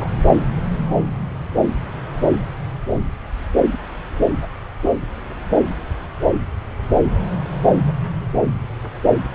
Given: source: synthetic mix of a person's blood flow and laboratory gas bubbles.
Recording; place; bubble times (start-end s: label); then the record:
Doppler ultrasound of blood flow; subclavian vein
0.00-0.18 s: bubbles
From the record:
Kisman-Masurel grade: 211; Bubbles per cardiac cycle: several, 3 to 8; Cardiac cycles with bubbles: 1 to 10%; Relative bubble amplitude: barely perceptible (0.100 to 0.250); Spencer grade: 1 (occasional bubble signal discernible with the cardiac motion signal, with majority of cardiac periods free of bubbles); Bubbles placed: anywhere in the cardiac cycle